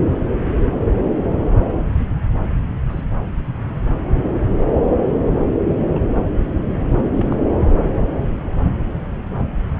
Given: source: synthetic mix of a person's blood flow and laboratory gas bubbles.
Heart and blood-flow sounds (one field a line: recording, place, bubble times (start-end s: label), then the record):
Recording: Doppler ultrasound of blood flow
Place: subclavian vein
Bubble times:
2.90-3.01 s: bubbles
5.95-5.99 s: bubbles
7.18-7.27 s: bubbles
7.30-7.35 s: bubbles
From the record:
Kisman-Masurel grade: 121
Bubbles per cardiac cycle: 1 to 2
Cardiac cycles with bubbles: 10 to 50%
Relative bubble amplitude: barely perceptible (0.100 to 0.250)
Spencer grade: 2 (many but less than half of the cardiac periods contain bubble signals, singularly or in groups)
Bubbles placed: anywhere in the cardiac cycle